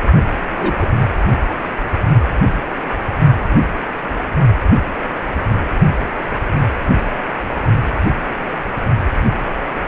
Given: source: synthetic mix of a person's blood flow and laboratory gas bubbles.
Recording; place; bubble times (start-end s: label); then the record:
Doppler ultrasound of blood flow; precordium
0.58-0.86 s: bubbles
From the record:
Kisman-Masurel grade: 113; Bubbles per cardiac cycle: 1 to 2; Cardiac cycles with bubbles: 1 to 10%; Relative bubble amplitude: loud (0.450 to 0.775); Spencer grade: 1 (occasional bubble signal discernible with the cardiac motion signal, with majority of cardiac periods free of bubbles); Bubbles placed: only in the low amplitude regions of the cardiac cycle